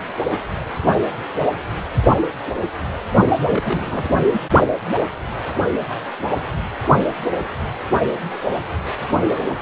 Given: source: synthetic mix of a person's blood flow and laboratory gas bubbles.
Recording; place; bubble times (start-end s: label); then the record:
Doppler ultrasound of blood flow; precordium
3.36-4.09 s: bubbles
4.31-4.41 s: bubbles
From the record:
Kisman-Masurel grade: 211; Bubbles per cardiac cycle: several, 3 to 8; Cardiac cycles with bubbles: 1 to 10%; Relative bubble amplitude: barely perceptible (0.100 to 0.250); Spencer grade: 1 (occasional bubble signal discernible with the cardiac motion signal, with majority of cardiac periods free of bubbles); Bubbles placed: only in the low amplitude regions of the cardiac cycle